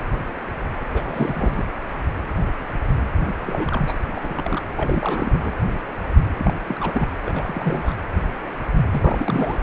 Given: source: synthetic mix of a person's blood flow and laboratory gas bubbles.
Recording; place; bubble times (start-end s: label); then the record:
Doppler ultrasound of blood flow; precordium
0.93-1.03 s: bubbles
1.05-1.65 s: bubbles
3.45-3.94 s: bubbles
4.14-4.62 s: bubbles
4.76-5.55 s: bubbles
6.36-6.54 s: bubbles
6.67-7.08 s: bubbles
7.25-7.95 s: bubbles
8.90-9.58 s: bubbles
From the record:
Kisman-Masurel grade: 332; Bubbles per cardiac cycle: rolling drumbeat, 9 or more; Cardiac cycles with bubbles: 50 to 99%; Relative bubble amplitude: moderate (0.250 to 0.450); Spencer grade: 3 (all of the cardiac periods contain showers or single bubble signals, but not dominating or overriding the cardiac motion signals); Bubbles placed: anywhere in the cardiac cycle